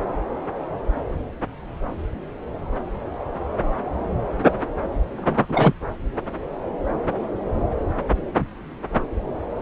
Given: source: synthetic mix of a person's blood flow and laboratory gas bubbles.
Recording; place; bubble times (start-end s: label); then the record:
Doppler ultrasound of blood flow; subclavian vein
5.17-5.46 s: bubbles
5.49-5.73 s: bubbles
From the record:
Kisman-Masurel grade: 213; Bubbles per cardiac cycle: several, 3 to 8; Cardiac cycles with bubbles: 1 to 10%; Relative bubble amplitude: loud (0.450 to 0.775); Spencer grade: 1 (occasional bubble signal discernible with the cardiac motion signal, with majority of cardiac periods free of bubbles); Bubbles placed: anywhere in the cardiac cycle